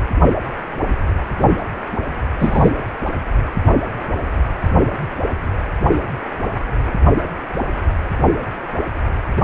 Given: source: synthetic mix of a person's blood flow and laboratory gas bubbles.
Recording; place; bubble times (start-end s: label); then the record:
Doppler ultrasound of blood flow; precordium
2.40-2.70 s: bubbles
From the record:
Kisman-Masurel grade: 123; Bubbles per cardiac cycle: 1 to 2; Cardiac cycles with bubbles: 10 to 50%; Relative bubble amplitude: loud (0.450 to 0.775); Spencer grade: 2 (many but less than half of the cardiac periods contain bubble signals, singularly or in groups); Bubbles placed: only in the low amplitude regions of the cardiac cycle